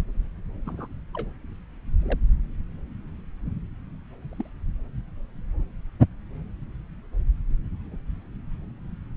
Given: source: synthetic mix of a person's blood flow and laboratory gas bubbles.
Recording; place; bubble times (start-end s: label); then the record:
Doppler ultrasound of blood flow; subclavian vein
0.66-0.87 s: bubbles
1.14-1.29 s: bubbles
2.02-2.18 s: bubbles
4.22-4.47 s: bubbles
From the record:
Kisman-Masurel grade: 121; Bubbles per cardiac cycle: 1 to 2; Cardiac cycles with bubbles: 10 to 50%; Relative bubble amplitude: barely perceptible (0.100 to 0.250); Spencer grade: 2 (many but less than half of the cardiac periods contain bubble signals, singularly or in groups); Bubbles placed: anywhere in the cardiac cycle